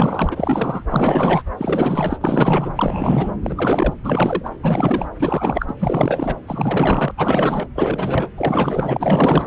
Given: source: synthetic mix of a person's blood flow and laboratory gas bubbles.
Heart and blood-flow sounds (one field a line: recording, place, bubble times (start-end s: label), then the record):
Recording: Doppler ultrasound of blood flow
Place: subclavian vein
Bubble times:
0.00-0.83 s: bubbles
0.89-1.43 s: bubbles
1.57-2.69 s: bubbles
2.75-3.32 s: bubbles
3.42-3.94 s: bubbles
4.04-4.50 s: bubbles
4.62-5.08 s: bubbles
5.19-5.74 s: bubbles
5.79-6.37 s: bubbles
6.47-7.12 s: bubbles
7.17-7.67 s: bubbles
7.75-8.27 s: bubbles
8.37-9.46 s: bubbles
From the record:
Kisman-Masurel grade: 444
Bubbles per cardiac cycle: continuous sound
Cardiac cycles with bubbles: 100%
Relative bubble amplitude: maximal (0.775 to 0.999)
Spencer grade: 4 (maximum detectable bubble signal sounding continuously throughout systole and diastole of every cardiac period, and overriding the amplitude of the normal cardiac signals)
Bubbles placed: anywhere in the cardiac cycle